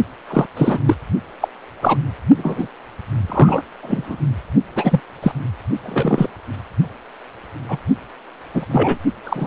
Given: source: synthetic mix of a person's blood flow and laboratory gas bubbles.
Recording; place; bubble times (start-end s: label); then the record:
Doppler ultrasound of blood flow; precordium
0.30-0.46 s: bubbles
0.56-0.80 s: bubbles
0.85-0.95 s: bubbles
1.40-1.48 s: bubbles
1.81-1.99 s: bubbles
2.36-2.67 s: bubbles
3.29-3.62 s: bubbles
3.82-4.18 s: bubbles
4.75-5.00 s: bubbles
5.23-5.32 s: bubbles
5.76-6.29 s: bubbles
7.69-7.78 s: bubbles
8.54-8.65 s: bubbles
8.71-8.97 s: bubbles
9.23-9.47 s: bubbles
From the record:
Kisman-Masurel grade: 243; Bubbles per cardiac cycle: several, 3 to 8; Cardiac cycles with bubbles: 100%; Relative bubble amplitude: loud (0.450 to 0.775); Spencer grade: 3 (all of the cardiac periods contain showers or single bubble signals, but not dominating or overriding the cardiac motion signals); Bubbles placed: only in the low amplitude regions of the cardiac cycle